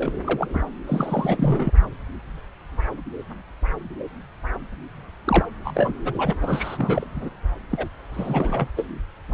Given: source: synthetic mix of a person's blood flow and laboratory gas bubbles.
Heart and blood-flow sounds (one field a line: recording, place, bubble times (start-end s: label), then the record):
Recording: Doppler ultrasound of blood flow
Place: subclavian vein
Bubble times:
0.00-0.12 s: bubbles
0.24-0.48 s: bubbles
0.53-0.61 s: bubbles
0.87-1.74 s: bubbles
5.25-5.45 s: bubbles
5.64-5.92 s: bubbles
6.04-6.33 s: bubbles
6.41-7.07 s: bubbles
7.14-7.29 s: bubbles
7.69-7.88 s: bubbles
8.13-8.69 s: bubbles
8.77-9.00 s: bubbles
9.28-9.34 s: bubbles
From the record:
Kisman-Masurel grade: 332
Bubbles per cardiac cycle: rolling drumbeat, 9 or more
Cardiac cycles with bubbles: 50 to 99%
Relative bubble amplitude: moderate (0.250 to 0.450)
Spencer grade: 3 (all of the cardiac periods contain showers or single bubble signals, but not dominating or overriding the cardiac motion signals)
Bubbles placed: anywhere in the cardiac cycle